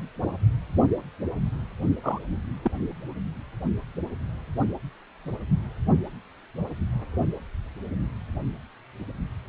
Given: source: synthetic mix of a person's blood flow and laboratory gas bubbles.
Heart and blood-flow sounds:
Doppler ultrasound of blood flow; precordium
2.03-2.19 s: bubbles
2.63-2.71 s: bubbles
From the record:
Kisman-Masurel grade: 111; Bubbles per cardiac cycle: 1 to 2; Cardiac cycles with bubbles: 1 to 10%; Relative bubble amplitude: barely perceptible (0.100 to 0.250); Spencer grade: 1 (occasional bubble signal discernible with the cardiac motion signal, with majority of cardiac periods free of bubbles); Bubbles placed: only in the low amplitude regions of the cardiac cycle

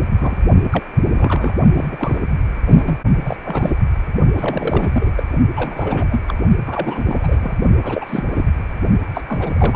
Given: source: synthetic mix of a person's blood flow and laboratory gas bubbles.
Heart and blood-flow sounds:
Doppler ultrasound of blood flow; precordium
0.19-0.38 s: bubbles
0.70-0.83 s: bubbles
1.14-1.55 s: bubbles
1.75-2.20 s: bubbles
2.66-2.98 s: bubbles
3.25-3.37 s: bubbles
3.45-3.77 s: bubbles
4.35-5.11 s: bubbles
5.17-5.23 s: bubbles
5.55-6.21 s: bubbles
6.27-6.34 s: bubbles
6.66-7.55 s: bubbles
7.83-8.45 s: bubbles
9.13-9.22 s: bubbles
9.28-9.76 s: bubbles
From the record:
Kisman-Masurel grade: 342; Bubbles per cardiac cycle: rolling drumbeat, 9 or more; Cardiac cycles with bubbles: 100%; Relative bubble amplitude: moderate (0.250 to 0.450); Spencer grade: 3 (all of the cardiac periods contain showers or single bubble signals, but not dominating or overriding the cardiac motion signals); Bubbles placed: only in the low amplitude regions of the cardiac cycle

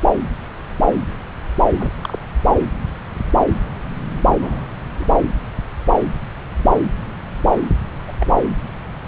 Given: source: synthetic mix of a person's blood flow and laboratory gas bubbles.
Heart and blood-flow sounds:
Doppler ultrasound of blood flow; subclavian vein
1.79-1.92 s: bubbles
2.01-2.19 s: bubbles
4.40-4.67 s: bubbles
5.00-5.05 s: bubbles
8.07-8.12 s: bubbles
8.20-8.34 s: bubbles
From the record:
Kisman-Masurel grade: 122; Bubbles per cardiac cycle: 1 to 2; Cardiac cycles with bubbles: 10 to 50%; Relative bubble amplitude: moderate (0.250 to 0.450); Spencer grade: 2 (many but less than half of the cardiac periods contain bubble signals, singularly or in groups); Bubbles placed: anywhere in the cardiac cycle

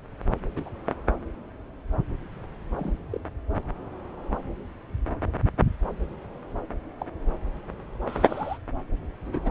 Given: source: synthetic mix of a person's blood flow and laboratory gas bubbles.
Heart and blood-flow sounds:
Doppler ultrasound of blood flow; subclavian vein
0.56-0.69 s: bubbles
0.85-0.93 s: bubbles
2.77-2.98 s: bubbles
3.10-3.18 s: bubbles
6.98-7.06 s: bubbles
8.06-8.57 s: bubbles
9.25-9.50 s: bubbles
From the record:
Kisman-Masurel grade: 121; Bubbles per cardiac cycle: 1 to 2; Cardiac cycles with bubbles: 10 to 50%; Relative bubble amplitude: barely perceptible (0.100 to 0.250); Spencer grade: 2 (many but less than half of the cardiac periods contain bubble signals, singularly or in groups); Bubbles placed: anywhere in the cardiac cycle

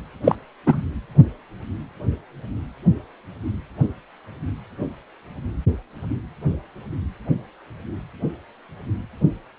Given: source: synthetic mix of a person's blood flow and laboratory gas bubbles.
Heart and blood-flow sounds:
Doppler ultrasound of blood flow; precordium
0.24-0.35 s: bubbles
0.67-0.81 s: bubbles
From the record:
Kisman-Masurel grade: 123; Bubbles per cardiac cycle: 1 to 2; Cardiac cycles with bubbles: 10 to 50%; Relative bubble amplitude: loud (0.450 to 0.775); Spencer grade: 2 (many but less than half of the cardiac periods contain bubble signals, singularly or in groups); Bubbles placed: anywhere in the cardiac cycle

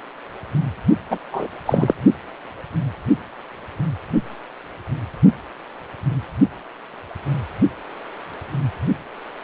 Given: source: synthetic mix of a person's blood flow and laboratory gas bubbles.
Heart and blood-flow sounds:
Doppler ultrasound of blood flow; precordium
1.10-1.19 s: bubbles
1.31-1.47 s: bubbles
1.66-1.95 s: bubbles
From the record:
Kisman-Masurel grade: 213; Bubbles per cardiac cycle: several, 3 to 8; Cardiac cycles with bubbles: 1 to 10%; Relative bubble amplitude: loud (0.450 to 0.775); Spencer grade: 1 (occasional bubble signal discernible with the cardiac motion signal, with majority of cardiac periods free of bubbles); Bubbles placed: only in the low amplitude regions of the cardiac cycle

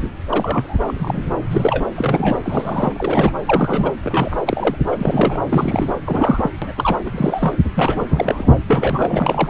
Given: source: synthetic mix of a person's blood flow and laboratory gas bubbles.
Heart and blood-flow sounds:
Doppler ultrasound of blood flow; subclavian vein
0.29-0.79 s: bubbles
0.86-1.21 s: bubbles
1.51-1.85 s: bubbles
1.94-2.40 s: bubbles
2.44-3.37 s: bubbles
3.47-3.91 s: bubbles
4.04-4.36 s: bubbles
4.46-4.77 s: bubbles
4.86-5.40 s: bubbles
5.49-5.90 s: bubbles
6.04-6.50 s: bubbles
6.62-6.74 s: bubbles
6.77-6.99 s: bubbles
7.06-7.55 s: bubbles
7.74-8.04 s: bubbles
8.09-8.54 s: bubbles
8.66-9.50 s: bubbles
From the record:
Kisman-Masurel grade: 242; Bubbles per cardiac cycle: several, 3 to 8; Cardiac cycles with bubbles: 100%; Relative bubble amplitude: moderate (0.250 to 0.450); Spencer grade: 3 (all of the cardiac periods contain showers or single bubble signals, but not dominating or overriding the cardiac motion signals); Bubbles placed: anywhere in the cardiac cycle

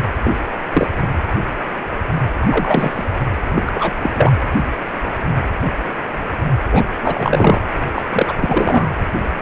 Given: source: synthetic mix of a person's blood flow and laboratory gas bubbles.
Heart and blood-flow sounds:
Doppler ultrasound of blood flow; precordium
0.24-0.33 s: bubbles
0.72-0.87 s: bubbles
2.42-3.04 s: bubbles
3.55-3.63 s: bubbles
3.66-4.10 s: bubbles
4.15-4.32 s: bubbles
6.71-6.85 s: bubbles
7.02-7.64 s: bubbles
7.95-8.02 s: bubbles
8.12-8.34 s: bubbles
8.41-8.88 s: bubbles
From the record:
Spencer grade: 3 (all of the cardiac periods contain showers or single bubble signals, but not dominating or overriding the cardiac motion signals); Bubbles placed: anywhere in the cardiac cycle

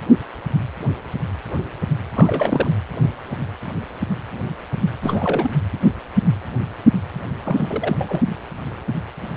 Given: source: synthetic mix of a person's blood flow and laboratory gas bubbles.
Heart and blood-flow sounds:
Doppler ultrasound of blood flow; precordium
2.14-2.72 s: bubbles
5.03-5.52 s: bubbles
7.44-8.21 s: bubbles
From the record:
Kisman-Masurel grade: 222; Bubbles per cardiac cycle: several, 3 to 8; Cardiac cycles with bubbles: 10 to 50%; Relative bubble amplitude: moderate (0.250 to 0.450); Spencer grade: 2 (many but less than half of the cardiac periods contain bubble signals, singularly or in groups); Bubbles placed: anywhere in the cardiac cycle

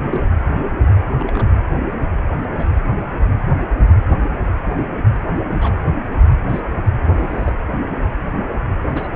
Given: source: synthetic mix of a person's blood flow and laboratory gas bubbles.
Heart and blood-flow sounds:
Doppler ultrasound of blood flow; precordium
0.10-0.32 s: bubbles
1.14-1.43 s: bubbles
2.57-2.65 s: bubbles
5.50-5.74 s: bubbles
6.49-6.60 s: bubbles
7.18-7.52 s: bubbles
8.91-9.10 s: bubbles
From the record:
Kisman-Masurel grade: 121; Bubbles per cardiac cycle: 1 to 2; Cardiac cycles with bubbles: 10 to 50%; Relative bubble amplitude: barely perceptible (0.100 to 0.250); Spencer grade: 2 (many but less than half of the cardiac periods contain bubble signals, singularly or in groups); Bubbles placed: anywhere in the cardiac cycle

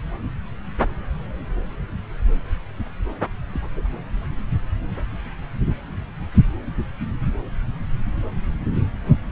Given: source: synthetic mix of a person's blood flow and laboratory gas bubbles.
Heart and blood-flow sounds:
Doppler ultrasound of blood flow; subclavian vein
3.52-3.62 s: bubbles
3.76-3.88 s: bubbles
From the record:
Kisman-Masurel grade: 111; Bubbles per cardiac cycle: 1 to 2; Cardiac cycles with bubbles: 1 to 10%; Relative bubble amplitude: barely perceptible (0.100 to 0.250); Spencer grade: 1 (occasional bubble signal discernible with the cardiac motion signal, with majority of cardiac periods free of bubbles); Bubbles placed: anywhere in the cardiac cycle

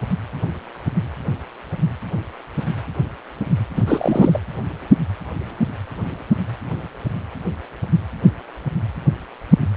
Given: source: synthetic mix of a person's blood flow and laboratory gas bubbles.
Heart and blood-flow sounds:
Doppler ultrasound of blood flow; precordium
3.76-3.82 s: bubbles
3.86-4.40 s: bubbles
From the record:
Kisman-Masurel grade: 213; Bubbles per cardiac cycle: several, 3 to 8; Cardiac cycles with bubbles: 1 to 10%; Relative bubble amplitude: loud (0.450 to 0.775); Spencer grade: 1 (occasional bubble signal discernible with the cardiac motion signal, with majority of cardiac periods free of bubbles); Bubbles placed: anywhere in the cardiac cycle

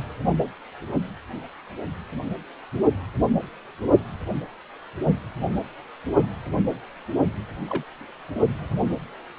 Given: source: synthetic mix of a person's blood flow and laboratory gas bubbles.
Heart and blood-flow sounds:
Doppler ultrasound of blood flow; precordium
7.68-7.84 s: bubbles
From the record:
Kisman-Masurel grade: 121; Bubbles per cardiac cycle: 1 to 2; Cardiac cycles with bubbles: 10 to 50%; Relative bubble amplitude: barely perceptible (0.100 to 0.250); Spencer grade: 2 (many but less than half of the cardiac periods contain bubble signals, singularly or in groups); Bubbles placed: only in the low amplitude regions of the cardiac cycle

